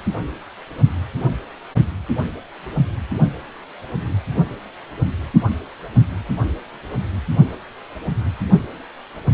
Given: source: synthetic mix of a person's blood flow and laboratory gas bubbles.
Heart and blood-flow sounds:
Doppler ultrasound of blood flow; precordium
no bubbles
From the record:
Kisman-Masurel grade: 000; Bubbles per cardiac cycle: 0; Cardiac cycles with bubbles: 0%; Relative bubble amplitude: no bubbles discernible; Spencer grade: 0 (complete lack of bubble signals)

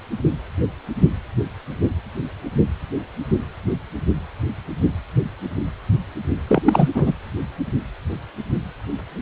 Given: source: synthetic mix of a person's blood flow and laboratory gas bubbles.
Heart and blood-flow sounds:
Doppler ultrasound of blood flow; precordium
6.47-6.62 s: bubbles
6.64-6.89 s: bubbles
6.95-7.14 s: bubbles
From the record:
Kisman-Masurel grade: 213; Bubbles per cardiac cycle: several, 3 to 8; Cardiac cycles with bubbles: 1 to 10%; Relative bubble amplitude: loud (0.450 to 0.775); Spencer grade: 1 (occasional bubble signal discernible with the cardiac motion signal, with majority of cardiac periods free of bubbles); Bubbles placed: anywhere in the cardiac cycle

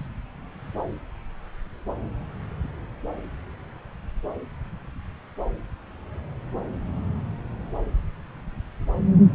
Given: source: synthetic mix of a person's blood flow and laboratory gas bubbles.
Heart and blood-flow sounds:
Doppler ultrasound of blood flow; subclavian vein
0.00-0.07 s: bubbles
From the record:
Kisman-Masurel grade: 122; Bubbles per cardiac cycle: 1 to 2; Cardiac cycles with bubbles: 10 to 50%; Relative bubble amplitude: moderate (0.250 to 0.450); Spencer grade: 2 (many but less than half of the cardiac periods contain bubble signals, singularly or in groups); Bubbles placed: anywhere in the cardiac cycle

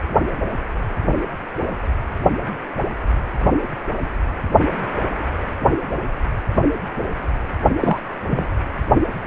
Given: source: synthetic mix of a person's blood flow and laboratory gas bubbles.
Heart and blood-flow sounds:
Doppler ultrasound of blood flow; precordium
7.79-8.00 s: bubbles
8.29-8.45 s: bubbles
From the record:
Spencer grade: 1 (occasional bubble signal discernible with the cardiac motion signal, with majority of cardiac periods free of bubbles); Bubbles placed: only in the low amplitude regions of the cardiac cycle

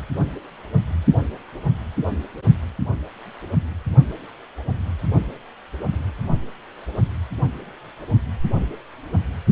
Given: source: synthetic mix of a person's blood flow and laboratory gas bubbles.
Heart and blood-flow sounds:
Doppler ultrasound of blood flow; precordium
no bubbles
From the record:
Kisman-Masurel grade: 000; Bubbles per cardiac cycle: 0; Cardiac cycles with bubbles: 0%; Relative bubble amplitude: no bubbles discernible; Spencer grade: 0 (complete lack of bubble signals)

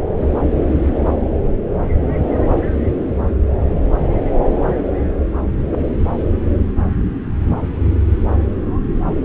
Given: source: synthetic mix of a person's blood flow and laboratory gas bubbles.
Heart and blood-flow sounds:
Doppler ultrasound of blood flow; subclavian vein
0.19-0.27 s: bubbles
0.57-0.64 s: bubbles
From the record:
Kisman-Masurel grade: 221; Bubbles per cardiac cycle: several, 3 to 8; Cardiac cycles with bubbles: 10 to 50%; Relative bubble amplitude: barely perceptible (0.100 to 0.250); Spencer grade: 2 (many but less than half of the cardiac periods contain bubble signals, singularly or in groups); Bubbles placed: anywhere in the cardiac cycle

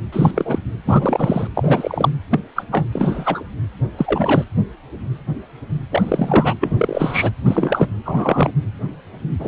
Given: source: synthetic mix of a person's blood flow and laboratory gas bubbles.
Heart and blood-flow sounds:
Doppler ultrasound of blood flow; precordium
0.12-0.58 s: bubbles
0.85-1.47 s: bubbles
1.55-2.09 s: bubbles
2.31-2.40 s: bubbles
2.56-2.62 s: bubbles
2.71-2.85 s: bubbles
2.92-3.44 s: bubbles
3.97-4.44 s: bubbles
5.91-6.54 s: bubbles
6.60-7.32 s: bubbles
7.46-7.89 s: bubbles
8.05-8.51 s: bubbles
9.39-9.48 s: bubbles
From the record:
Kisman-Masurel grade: 233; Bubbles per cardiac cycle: several, 3 to 8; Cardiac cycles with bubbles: 50 to 99%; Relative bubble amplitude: loud (0.450 to 0.775); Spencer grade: 3 (all of the cardiac periods contain showers or single bubble signals, but not dominating or overriding the cardiac motion signals); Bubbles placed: anywhere in the cardiac cycle

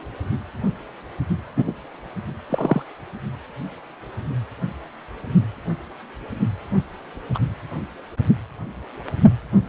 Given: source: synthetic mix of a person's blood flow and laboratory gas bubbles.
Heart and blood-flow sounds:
Doppler ultrasound of blood flow; precordium
1.56-1.64 s: bubbles
1.67-1.72 s: bubbles
2.49-2.82 s: bubbles
7.34-7.38 s: bubbles
From the record:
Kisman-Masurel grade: 123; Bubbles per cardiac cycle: 1 to 2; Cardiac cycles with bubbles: 10 to 50%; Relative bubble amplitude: loud (0.450 to 0.775); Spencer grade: 2 (many but less than half of the cardiac periods contain bubble signals, singularly or in groups); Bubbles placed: only in the low amplitude regions of the cardiac cycle

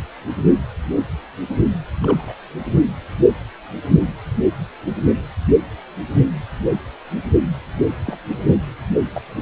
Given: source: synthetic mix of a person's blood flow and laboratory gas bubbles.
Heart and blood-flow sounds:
Doppler ultrasound of blood flow; precordium
2.03-2.35 s: bubbles
6.14-6.29 s: bubbles
8.05-8.18 s: bubbles
9.14-9.21 s: bubbles
From the record:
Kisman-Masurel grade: 121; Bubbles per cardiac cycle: 1 to 2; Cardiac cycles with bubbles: 10 to 50%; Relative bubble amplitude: barely perceptible (0.100 to 0.250); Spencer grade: 2 (many but less than half of the cardiac periods contain bubble signals, singularly or in groups); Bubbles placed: anywhere in the cardiac cycle

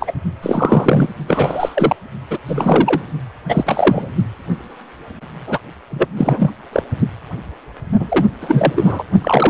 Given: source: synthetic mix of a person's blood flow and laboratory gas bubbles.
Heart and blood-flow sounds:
Doppler ultrasound of blood flow; precordium
0.00-0.13 s: bubbles
0.42-1.09 s: bubbles
1.27-1.96 s: bubbles
2.30-2.38 s: bubbles
2.48-3.02 s: bubbles
3.48-4.11 s: bubbles
5.47-5.58 s: bubbles
5.91-6.06 s: bubbles
6.17-6.51 s: bubbles
6.72-6.83 s: bubbles
7.99-8.27 s: bubbles
8.41-9.04 s: bubbles
9.21-9.50 s: bubbles
From the record:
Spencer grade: 3 (all of the cardiac periods contain showers or single bubble signals, but not dominating or overriding the cardiac motion signals); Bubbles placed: only in the low amplitude regions of the cardiac cycle

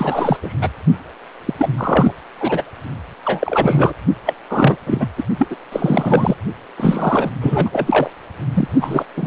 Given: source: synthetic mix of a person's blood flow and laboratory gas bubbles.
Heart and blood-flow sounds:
Doppler ultrasound of blood flow; precordium
0.00-0.37 s: bubbles
0.43-0.53 s: bubbles
0.61-0.69 s: bubbles
1.45-1.53 s: bubbles
1.57-1.68 s: bubbles
1.77-2.12 s: bubbles
2.40-2.62 s: bubbles
3.25-3.93 s: bubbles
4.25-4.34 s: bubbles
4.49-4.76 s: bubbles
4.86-5.07 s: bubbles
5.17-5.22 s: bubbles
5.38-5.47 s: bubbles
5.50-5.56 s: bubbles
5.72-6.35 s: bubbles
6.76-7.30 s: bubbles
7.41-8.11 s: bubbles
8.54-8.68 s: bubbles
8.80-9.04 s: bubbles
9.16-9.27 s: bubbles
From the record:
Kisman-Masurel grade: 343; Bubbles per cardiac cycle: rolling drumbeat, 9 or more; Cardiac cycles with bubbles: 100%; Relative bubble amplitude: loud (0.450 to 0.775); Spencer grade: 3 (all of the cardiac periods contain showers or single bubble signals, but not dominating or overriding the cardiac motion signals); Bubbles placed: only in the low amplitude regions of the cardiac cycle

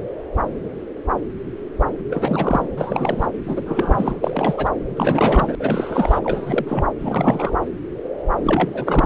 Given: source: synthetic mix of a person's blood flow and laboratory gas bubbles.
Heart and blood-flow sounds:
Doppler ultrasound of blood flow; subclavian vein
2.10-2.66 s: bubbles
2.77-3.31 s: bubbles
3.46-4.70 s: bubbles
4.95-5.55 s: bubbles
5.59-6.20 s: bubbles
6.23-6.85 s: bubbles
6.99-7.56 s: bubbles
8.43-9.06 s: bubbles
From the record:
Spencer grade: 3 (all of the cardiac periods contain showers or single bubble signals, but not dominating or overriding the cardiac motion signals); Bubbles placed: anywhere in the cardiac cycle

